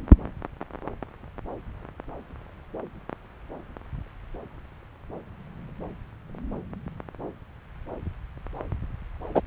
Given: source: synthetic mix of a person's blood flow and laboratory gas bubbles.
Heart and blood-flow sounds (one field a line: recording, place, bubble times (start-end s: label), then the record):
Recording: Doppler ultrasound of blood flow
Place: subclavian vein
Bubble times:
9.34-9.41 s: bubbles
From the record:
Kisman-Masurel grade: 113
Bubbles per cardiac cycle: 1 to 2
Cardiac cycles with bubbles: 1 to 10%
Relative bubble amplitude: loud (0.450 to 0.775)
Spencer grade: 1 (occasional bubble signal discernible with the cardiac motion signal, with majority of cardiac periods free of bubbles)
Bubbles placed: anywhere in the cardiac cycle